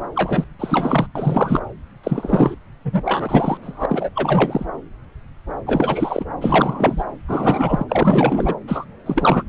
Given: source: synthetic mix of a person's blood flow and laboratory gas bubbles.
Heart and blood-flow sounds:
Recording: Doppler ultrasound of blood flow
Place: subclavian vein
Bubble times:
0.15-0.45 s: bubbles
0.58-1.07 s: bubbles
1.15-1.60 s: bubbles
2.04-2.55 s: bubbles
2.85-3.58 s: bubbles
3.62-3.86 s: bubbles
3.89-4.09 s: bubbles
4.16-4.66 s: bubbles
5.67-6.25 s: bubbles
6.41-7.04 s: bubbles
7.28-7.85 s: bubbles
7.88-8.54 s: bubbles
8.67-8.86 s: bubbles
9.06-9.43 s: bubbles
From the record:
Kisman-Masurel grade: 333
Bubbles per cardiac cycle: rolling drumbeat, 9 or more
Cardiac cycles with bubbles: 50 to 99%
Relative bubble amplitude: loud (0.450 to 0.775)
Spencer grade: 3 (all of the cardiac periods contain showers or single bubble signals, but not dominating or overriding the cardiac motion signals)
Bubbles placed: anywhere in the cardiac cycle

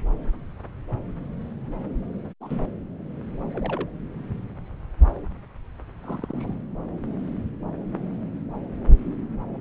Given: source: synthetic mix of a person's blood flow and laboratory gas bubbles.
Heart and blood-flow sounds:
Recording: Doppler ultrasound of blood flow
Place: subclavian vein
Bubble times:
2.40-2.59 s: bubbles
3.53-3.90 s: bubbles
6.04-6.54 s: bubbles
From the record:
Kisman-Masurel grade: 121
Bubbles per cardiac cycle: 1 to 2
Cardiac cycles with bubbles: 10 to 50%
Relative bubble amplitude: barely perceptible (0.100 to 0.250)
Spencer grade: 2 (many but less than half of the cardiac periods contain bubble signals, singularly or in groups)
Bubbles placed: anywhere in the cardiac cycle

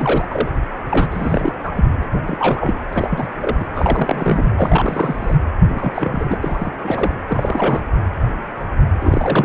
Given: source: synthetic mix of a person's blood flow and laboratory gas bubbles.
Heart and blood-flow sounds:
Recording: Doppler ultrasound of blood flow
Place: precordium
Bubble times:
0.00-0.25 s: bubbles
0.30-0.48 s: bubbles
0.89-1.54 s: bubbles
1.64-1.73 s: bubbles
1.76-1.85 s: bubbles
2.00-2.04 s: bubbles
2.14-2.23 s: bubbles
2.25-2.79 s: bubbles
2.93-3.27 s: bubbles
3.38-3.67 s: bubbles
3.74-4.47 s: bubbles
4.56-5.36 s: bubbles
5.68-6.36 s: bubbles
6.41-6.71 s: bubbles
6.84-7.11 s: bubbles
7.28-7.81 s: bubbles
8.99-9.44 s: bubbles
From the record:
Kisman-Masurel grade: 332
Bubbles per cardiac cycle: rolling drumbeat, 9 or more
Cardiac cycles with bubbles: 50 to 99%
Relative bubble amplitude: moderate (0.250 to 0.450)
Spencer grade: 3 (all of the cardiac periods contain showers or single bubble signals, but not dominating or overriding the cardiac motion signals)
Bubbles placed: anywhere in the cardiac cycle

